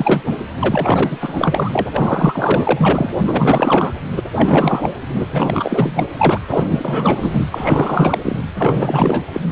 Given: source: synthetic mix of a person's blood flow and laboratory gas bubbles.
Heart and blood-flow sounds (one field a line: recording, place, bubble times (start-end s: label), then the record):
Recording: Doppler ultrasound of blood flow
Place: precordium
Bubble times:
0.00-0.21 s: bubbles
0.27-0.39 s: bubbles
0.59-1.89 s: bubbles
1.93-3.15 s: bubbles
3.19-3.94 s: bubbles
4.11-4.22 s: bubbles
4.33-4.95 s: bubbles
5.09-5.25 s: bubbles
5.32-6.09 s: bubbles
6.18-6.39 s: bubbles
6.50-7.47 s: bubbles
7.50-8.19 s: bubbles
8.22-8.41 s: bubbles
8.59-9.24 s: bubbles
9.34-9.41 s: bubbles
From the record:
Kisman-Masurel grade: 444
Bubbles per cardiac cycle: continuous sound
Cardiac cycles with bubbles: 100%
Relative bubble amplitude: maximal (0.775 to 0.999)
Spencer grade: 4 (maximum detectable bubble signal sounding continuously throughout systole and diastole of every cardiac period, and overriding the amplitude of the normal cardiac signals)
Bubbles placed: anywhere in the cardiac cycle